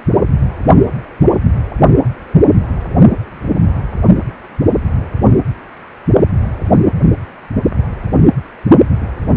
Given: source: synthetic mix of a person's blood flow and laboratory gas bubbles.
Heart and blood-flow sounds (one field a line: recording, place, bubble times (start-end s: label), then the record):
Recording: Doppler ultrasound of blood flow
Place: precordium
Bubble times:
3.67-3.82 s: bubbles
From the record:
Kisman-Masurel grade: 111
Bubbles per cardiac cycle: 1 to 2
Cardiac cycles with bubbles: 1 to 10%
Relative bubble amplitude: barely perceptible (0.100 to 0.250)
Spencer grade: 1 (occasional bubble signal discernible with the cardiac motion signal, with majority of cardiac periods free of bubbles)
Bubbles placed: only in the low amplitude regions of the cardiac cycle